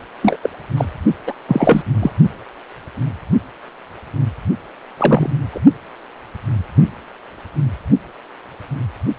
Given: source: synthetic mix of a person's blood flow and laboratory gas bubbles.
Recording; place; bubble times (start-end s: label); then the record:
Doppler ultrasound of blood flow; precordium
0.23-0.37 s: bubbles
0.42-0.50 s: bubbles
0.77-0.85 s: bubbles
1.27-1.33 s: bubbles
1.48-1.83 s: bubbles
2.01-2.10 s: bubbles
4.97-5.34 s: bubbles
5.52-5.60 s: bubbles
From the record:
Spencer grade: 2 (many but less than half of the cardiac periods contain bubble signals, singularly or in groups); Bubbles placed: only in the low amplitude regions of the cardiac cycle